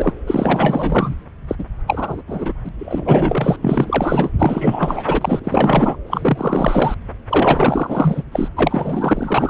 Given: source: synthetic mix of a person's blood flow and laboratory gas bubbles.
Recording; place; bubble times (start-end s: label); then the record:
Doppler ultrasound of blood flow; subclavian vein
0.00-0.13 s: bubbles
0.27-1.15 s: bubbles
1.48-1.55 s: bubbles
1.58-1.65 s: bubbles
1.87-2.23 s: bubbles
2.27-2.53 s: bubbles
2.64-2.69 s: bubbles
2.78-3.56 s: bubbles
3.61-4.29 s: bubbles
4.39-5.41 s: bubbles
5.44-5.97 s: bubbles
6.07-6.97 s: bubbles
7.29-8.23 s: bubbles
8.31-8.49 s: bubbles
8.56-9.50 s: bubbles
From the record:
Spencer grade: 4 (maximum detectable bubble signal sounding continuously throughout systole and diastole of every cardiac period, and overriding the amplitude of the normal cardiac signals); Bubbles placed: anywhere in the cardiac cycle